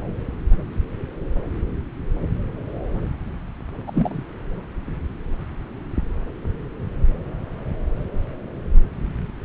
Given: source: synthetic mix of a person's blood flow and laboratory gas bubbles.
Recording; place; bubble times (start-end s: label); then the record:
Doppler ultrasound of blood flow; subclavian vein
3.87-4.23 s: bubbles
From the record:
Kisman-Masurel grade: 211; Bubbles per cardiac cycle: several, 3 to 8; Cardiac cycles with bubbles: 1 to 10%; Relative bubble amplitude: barely perceptible (0.100 to 0.250); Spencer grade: 1 (occasional bubble signal discernible with the cardiac motion signal, with majority of cardiac periods free of bubbles); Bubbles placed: anywhere in the cardiac cycle